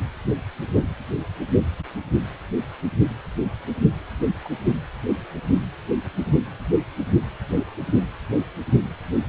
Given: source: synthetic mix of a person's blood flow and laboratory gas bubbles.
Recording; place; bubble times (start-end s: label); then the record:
Doppler ultrasound of blood flow; precordium
4.45-4.50 s: bubbles
From the record:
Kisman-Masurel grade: 111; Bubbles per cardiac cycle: 1 to 2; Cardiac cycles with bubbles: 1 to 10%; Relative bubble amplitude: barely perceptible (0.100 to 0.250); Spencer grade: 1 (occasional bubble signal discernible with the cardiac motion signal, with majority of cardiac periods free of bubbles); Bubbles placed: anywhere in the cardiac cycle